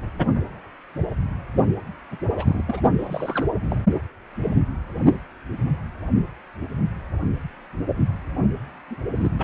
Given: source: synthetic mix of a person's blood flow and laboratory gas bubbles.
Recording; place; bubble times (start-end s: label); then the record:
Doppler ultrasound of blood flow; precordium
2.11-2.18 s: bubbles
2.37-2.65 s: bubbles
2.68-2.81 s: bubbles
2.97-3.46 s: bubbles
3.64-3.83 s: bubbles
8.90-8.97 s: bubbles
9.15-9.31 s: bubbles
9.38-9.44 s: bubbles
From the record:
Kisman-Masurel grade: 221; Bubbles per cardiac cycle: several, 3 to 8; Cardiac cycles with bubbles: 10 to 50%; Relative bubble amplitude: barely perceptible (0.100 to 0.250); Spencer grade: 2 (many but less than half of the cardiac periods contain bubble signals, singularly or in groups); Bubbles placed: only in the low amplitude regions of the cardiac cycle